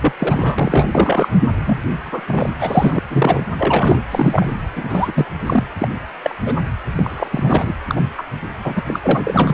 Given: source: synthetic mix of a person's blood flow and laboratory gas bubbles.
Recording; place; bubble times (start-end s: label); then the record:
Doppler ultrasound of blood flow; precordium
0.01-0.13 s: bubbles
0.19-0.88 s: bubbles
0.91-1.28 s: bubbles
1.66-1.80 s: bubbles
2.03-2.21 s: bubbles
2.27-2.49 s: bubbles
2.59-3.00 s: bubbles
3.09-3.43 s: bubbles
3.57-4.02 s: bubbles
4.10-4.49 s: bubbles
4.75-5.26 s: bubbles
5.46-5.64 s: bubbles
5.78-5.89 s: bubbles
6.24-6.35 s: bubbles
6.45-6.58 s: bubbles
6.96-7.74 s: bubbles
7.88-8.01 s: bubbles
8.18-8.24 s: bubbles
8.64-8.84 s: bubbles
8.86-9.00 s: bubbles
9.02-9.54 s: bubbles
From the record:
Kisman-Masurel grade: 233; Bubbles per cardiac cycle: several, 3 to 8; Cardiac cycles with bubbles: 50 to 99%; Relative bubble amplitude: loud (0.450 to 0.775); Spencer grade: 3 (all of the cardiac periods contain showers or single bubble signals, but not dominating or overriding the cardiac motion signals); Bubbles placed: anywhere in the cardiac cycle